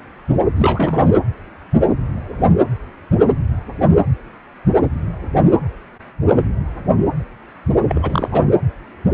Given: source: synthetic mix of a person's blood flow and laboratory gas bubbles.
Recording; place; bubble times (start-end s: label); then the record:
Doppler ultrasound of blood flow; precordium
0.56-1.06 s: bubbles
7.88-8.29 s: bubbles
8.31-8.48 s: bubbles
From the record:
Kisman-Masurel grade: 222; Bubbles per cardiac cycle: several, 3 to 8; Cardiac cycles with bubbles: 10 to 50%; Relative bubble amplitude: moderate (0.250 to 0.450); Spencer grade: 2 (many but less than half of the cardiac periods contain bubble signals, singularly or in groups); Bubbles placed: anywhere in the cardiac cycle